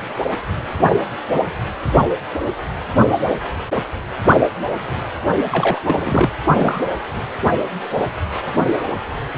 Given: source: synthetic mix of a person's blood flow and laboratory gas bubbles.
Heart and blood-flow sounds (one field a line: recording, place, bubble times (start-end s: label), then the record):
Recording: Doppler ultrasound of blood flow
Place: precordium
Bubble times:
5.51-5.79 s: bubbles
5.86-6.29 s: bubbles
6.55-6.80 s: bubbles
From the record:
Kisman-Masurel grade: 222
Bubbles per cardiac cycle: several, 3 to 8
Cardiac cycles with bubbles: 10 to 50%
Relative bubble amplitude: moderate (0.250 to 0.450)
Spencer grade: 2 (many but less than half of the cardiac periods contain bubble signals, singularly or in groups)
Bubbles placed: only in the low amplitude regions of the cardiac cycle